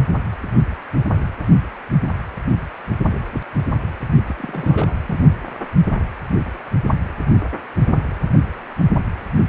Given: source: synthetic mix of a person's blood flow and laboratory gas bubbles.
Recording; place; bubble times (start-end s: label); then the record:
Doppler ultrasound of blood flow; precordium
4.26-4.95 s: bubbles
5.07-5.19 s: bubbles
From the record:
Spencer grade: 1 (occasional bubble signal discernible with the cardiac motion signal, with majority of cardiac periods free of bubbles); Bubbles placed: only in the low amplitude regions of the cardiac cycle